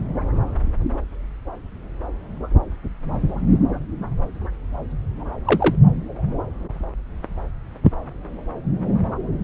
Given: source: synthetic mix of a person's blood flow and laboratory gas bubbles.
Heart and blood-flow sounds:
Doppler ultrasound of blood flow; subclavian vein
5.45-5.75 s: bubbles
From the record:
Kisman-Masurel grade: 113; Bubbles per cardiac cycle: 1 to 2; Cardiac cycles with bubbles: 1 to 10%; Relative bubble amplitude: loud (0.450 to 0.775); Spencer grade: 1 (occasional bubble signal discernible with the cardiac motion signal, with majority of cardiac periods free of bubbles); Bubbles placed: anywhere in the cardiac cycle

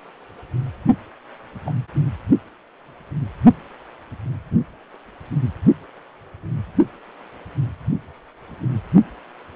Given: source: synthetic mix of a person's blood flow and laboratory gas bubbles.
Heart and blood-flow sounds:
Doppler ultrasound of blood flow; precordium
1.66-1.73 s: bubbles
From the record:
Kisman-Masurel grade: 111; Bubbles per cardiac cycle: 1 to 2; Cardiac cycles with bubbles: 1 to 10%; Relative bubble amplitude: barely perceptible (0.100 to 0.250); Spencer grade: 1 (occasional bubble signal discernible with the cardiac motion signal, with majority of cardiac periods free of bubbles); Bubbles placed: only in the low amplitude regions of the cardiac cycle

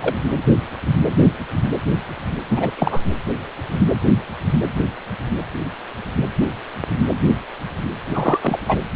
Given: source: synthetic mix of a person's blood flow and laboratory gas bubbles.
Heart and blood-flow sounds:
Doppler ultrasound of blood flow; precordium
0.00-0.15 s: bubbles
2.48-2.72 s: bubbles
2.77-3.03 s: bubbles
8.14-8.60 s: bubbles
8.66-8.78 s: bubbles
From the record:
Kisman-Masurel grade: 222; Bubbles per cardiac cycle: several, 3 to 8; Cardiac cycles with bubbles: 10 to 50%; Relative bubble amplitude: moderate (0.250 to 0.450); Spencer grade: 2 (many but less than half of the cardiac periods contain bubble signals, singularly or in groups); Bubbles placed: anywhere in the cardiac cycle

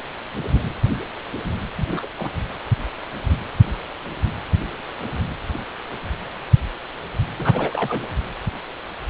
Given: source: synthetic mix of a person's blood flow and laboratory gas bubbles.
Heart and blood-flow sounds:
Doppler ultrasound of blood flow; precordium
1.77-2.08 s: bubbles
2.19-2.29 s: bubbles
7.38-8.12 s: bubbles
From the record:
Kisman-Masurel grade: 222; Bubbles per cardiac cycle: several, 3 to 8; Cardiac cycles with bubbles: 10 to 50%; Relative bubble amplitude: moderate (0.250 to 0.450); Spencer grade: 2 (many but less than half of the cardiac periods contain bubble signals, singularly or in groups); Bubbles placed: anywhere in the cardiac cycle

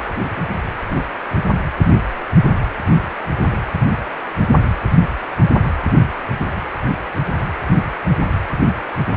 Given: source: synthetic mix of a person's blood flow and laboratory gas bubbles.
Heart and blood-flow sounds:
Doppler ultrasound of blood flow; precordium
0.00-0.05 s: bubbles
From the record:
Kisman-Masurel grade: 211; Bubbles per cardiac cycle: several, 3 to 8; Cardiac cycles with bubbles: 1 to 10%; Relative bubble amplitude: barely perceptible (0.100 to 0.250); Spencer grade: 1 (occasional bubble signal discernible with the cardiac motion signal, with majority of cardiac periods free of bubbles); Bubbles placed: anywhere in the cardiac cycle

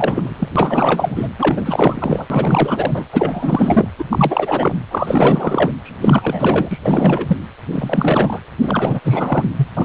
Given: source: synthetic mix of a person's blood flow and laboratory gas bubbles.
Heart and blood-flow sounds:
Doppler ultrasound of blood flow; precordium
0.00-0.48 s: bubbles
0.55-1.28 s: bubbles
1.39-2.27 s: bubbles
2.30-3.05 s: bubbles
3.12-3.89 s: bubbles
3.98-4.04 s: bubbles
4.11-4.75 s: bubbles
4.91-5.71 s: bubbles
5.83-6.79 s: bubbles
6.82-7.37 s: bubbles
7.71-8.40 s: bubbles
8.62-9.00 s: bubbles
9.03-9.44 s: bubbles
9.57-9.68 s: bubbles
9.77-9.85 s: bubbles
From the record:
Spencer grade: 4 (maximum detectable bubble signal sounding continuously throughout systole and diastole of every cardiac period, and overriding the amplitude of the normal cardiac signals); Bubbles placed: anywhere in the cardiac cycle

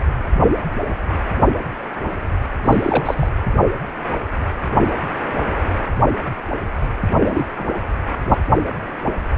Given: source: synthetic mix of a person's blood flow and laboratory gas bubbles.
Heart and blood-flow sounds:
Doppler ultrasound of blood flow; precordium
2.64-3.29 s: bubbles
7.05-7.46 s: bubbles
7.57-7.80 s: bubbles
From the record:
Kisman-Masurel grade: 222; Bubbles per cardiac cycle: several, 3 to 8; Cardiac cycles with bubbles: 10 to 50%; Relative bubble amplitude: moderate (0.250 to 0.450); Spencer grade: 2 (many but less than half of the cardiac periods contain bubble signals, singularly or in groups); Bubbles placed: anywhere in the cardiac cycle

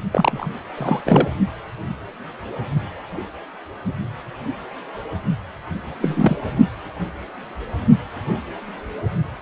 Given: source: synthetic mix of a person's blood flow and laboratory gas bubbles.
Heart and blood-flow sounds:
Doppler ultrasound of blood flow; precordium
0.11-0.49 s: bubbles
0.77-1.01 s: bubbles
1.05-1.28 s: bubbles
6.02-6.37 s: bubbles
From the record:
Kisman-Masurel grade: 222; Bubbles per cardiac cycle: several, 3 to 8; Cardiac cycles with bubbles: 10 to 50%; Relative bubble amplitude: moderate (0.250 to 0.450); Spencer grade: 2 (many but less than half of the cardiac periods contain bubble signals, singularly or in groups); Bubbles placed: only in the low amplitude regions of the cardiac cycle

